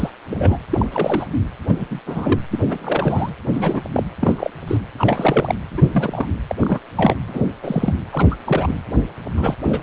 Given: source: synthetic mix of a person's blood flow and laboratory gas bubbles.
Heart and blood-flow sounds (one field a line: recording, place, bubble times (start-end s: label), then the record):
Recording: Doppler ultrasound of blood flow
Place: precordium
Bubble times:
0.00-0.10 s: bubbles
0.30-0.59 s: bubbles
0.69-0.86 s: bubbles
0.92-1.26 s: bubbles
1.67-1.88 s: bubbles
1.90-2.00 s: bubbles
2.06-2.40 s: bubbles
2.50-2.60 s: bubbles
2.67-3.34 s: bubbles
3.53-3.81 s: bubbles
3.92-4.04 s: bubbles
4.21-4.50 s: bubbles
4.67-4.78 s: bubbles
4.99-5.55 s: bubbles
5.70-6.26 s: bubbles
6.49-6.55 s: bubbles
6.58-6.79 s: bubbles
6.96-7.14 s: bubbles
7.26-7.42 s: bubbles
7.63-7.93 s: bubbles
8.11-8.27 s: bubbles
8.30-8.36 s: bubbles
8.46-8.80 s: bubbles
9.37-9.55 s: bubbles
9.66-9.83 s: bubbles
From the record:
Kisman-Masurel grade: 242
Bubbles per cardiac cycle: several, 3 to 8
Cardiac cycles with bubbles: 100%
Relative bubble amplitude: moderate (0.250 to 0.450)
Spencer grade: 3 (all of the cardiac periods contain showers or single bubble signals, but not dominating or overriding the cardiac motion signals)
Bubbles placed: anywhere in the cardiac cycle